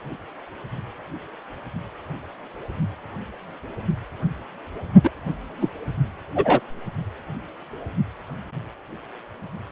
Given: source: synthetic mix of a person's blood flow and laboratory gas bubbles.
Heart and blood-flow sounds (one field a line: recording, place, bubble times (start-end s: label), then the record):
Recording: Doppler ultrasound of blood flow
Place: precordium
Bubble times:
5.04-5.10 s: bubbles
5.61-5.69 s: bubbles
6.35-6.60 s: bubbles
From the record:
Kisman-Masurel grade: 213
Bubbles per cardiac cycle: several, 3 to 8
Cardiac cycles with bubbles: 1 to 10%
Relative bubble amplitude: loud (0.450 to 0.775)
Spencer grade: 1 (occasional bubble signal discernible with the cardiac motion signal, with majority of cardiac periods free of bubbles)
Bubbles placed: only in the low amplitude regions of the cardiac cycle